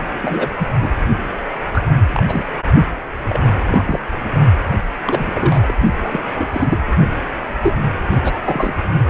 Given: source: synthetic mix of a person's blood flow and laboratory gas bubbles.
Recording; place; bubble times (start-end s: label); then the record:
Doppler ultrasound of blood flow; precordium
0.21-0.51 s: bubbles
0.58-0.67 s: bubbles
0.76-0.91 s: bubbles
1.74-1.82 s: bubbles
2.12-2.23 s: bubbles
2.27-2.44 s: bubbles
3.25-3.40 s: bubbles
3.45-4.00 s: bubbles
5.06-5.30 s: bubbles
5.33-5.75 s: bubbles
6.02-6.19 s: bubbles
6.38-6.47 s: bubbles
6.52-6.76 s: bubbles
7.63-7.78 s: bubbles
8.10-8.19 s: bubbles
8.23-8.33 s: bubbles
8.45-8.74 s: bubbles
From the record:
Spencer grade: 3 (all of the cardiac periods contain showers or single bubble signals, but not dominating or overriding the cardiac motion signals); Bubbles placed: only in the low amplitude regions of the cardiac cycle